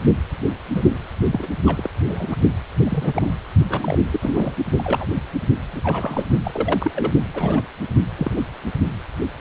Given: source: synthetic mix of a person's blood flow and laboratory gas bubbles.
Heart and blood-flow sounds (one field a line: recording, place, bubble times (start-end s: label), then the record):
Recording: Doppler ultrasound of blood flow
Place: precordium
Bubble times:
0.69-0.83 s: bubbles
1.32-1.47 s: bubbles
1.66-1.90 s: bubbles
2.08-2.26 s: bubbles
2.30-2.37 s: bubbles
2.80-3.32 s: bubbles
3.68-3.98 s: bubbles
4.12-4.58 s: bubbles
4.78-5.07 s: bubbles
5.73-5.81 s: bubbles
5.83-6.26 s: bubbles
6.44-6.92 s: bubbles
6.96-7.12 s: bubbles
7.33-7.66 s: bubbles
8.15-8.43 s: bubbles
From the record:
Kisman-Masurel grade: 232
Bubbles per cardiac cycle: several, 3 to 8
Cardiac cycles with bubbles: 50 to 99%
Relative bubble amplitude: moderate (0.250 to 0.450)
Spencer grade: 3 (all of the cardiac periods contain showers or single bubble signals, but not dominating or overriding the cardiac motion signals)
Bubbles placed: only in the low amplitude regions of the cardiac cycle